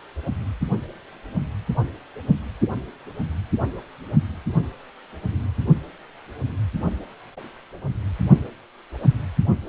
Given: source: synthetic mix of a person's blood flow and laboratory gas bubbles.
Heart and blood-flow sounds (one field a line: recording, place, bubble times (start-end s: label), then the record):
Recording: Doppler ultrasound of blood flow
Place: precordium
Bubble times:
no bubbles
From the record:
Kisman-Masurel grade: 000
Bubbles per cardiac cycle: 0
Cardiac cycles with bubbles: 0%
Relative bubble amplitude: no bubbles discernible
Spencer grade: 0 (complete lack of bubble signals)